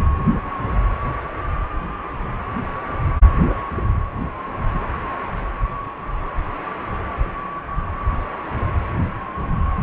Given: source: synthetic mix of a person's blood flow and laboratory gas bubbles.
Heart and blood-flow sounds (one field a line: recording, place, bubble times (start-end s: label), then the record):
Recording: Doppler ultrasound of blood flow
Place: precordium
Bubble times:
no bubbles
From the record:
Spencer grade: 0 (complete lack of bubble signals)